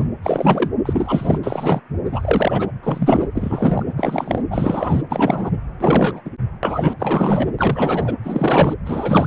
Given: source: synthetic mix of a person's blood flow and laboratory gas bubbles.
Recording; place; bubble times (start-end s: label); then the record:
Doppler ultrasound of blood flow; precordium
0.00-0.08 s: bubbles
0.22-0.69 s: bubbles
0.86-1.39 s: bubbles
1.43-1.80 s: bubbles
2.08-2.71 s: bubbles
2.83-3.28 s: bubbles
3.35-3.83 s: bubbles
3.96-4.42 s: bubbles
4.50-5.03 s: bubbles
5.09-5.51 s: bubbles
5.80-6.22 s: bubbles
6.25-6.30 s: bubbles
6.63-6.94 s: bubbles
6.99-7.48 s: bubbles
7.58-8.14 s: bubbles
8.22-8.73 s: bubbles
8.85-9.26 s: bubbles
From the record:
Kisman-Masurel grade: 343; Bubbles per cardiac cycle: rolling drumbeat, 9 or more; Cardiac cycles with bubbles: 100%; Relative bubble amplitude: loud (0.450 to 0.775); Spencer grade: 3 (all of the cardiac periods contain showers or single bubble signals, but not dominating or overriding the cardiac motion signals); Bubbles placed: anywhere in the cardiac cycle